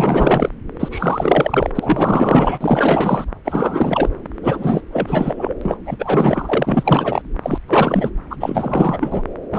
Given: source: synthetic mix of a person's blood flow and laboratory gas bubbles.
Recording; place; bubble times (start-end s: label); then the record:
Doppler ultrasound of blood flow; subclavian vein
0.00-0.49 s: bubbles
0.79-1.70 s: bubbles
1.75-2.58 s: bubbles
2.60-3.25 s: bubbles
3.45-4.09 s: bubbles
4.42-4.82 s: bubbles
4.92-5.54 s: bubbles
5.61-5.78 s: bubbles
5.86-7.22 s: bubbles
7.42-7.58 s: bubbles
7.68-8.10 s: bubbles
8.30-8.37 s: bubbles
8.40-9.22 s: bubbles
9.52-9.59 s: bubbles
From the record:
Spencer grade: 4 (maximum detectable bubble signal sounding continuously throughout systole and diastole of every cardiac period, and overriding the amplitude of the normal cardiac signals); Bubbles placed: anywhere in the cardiac cycle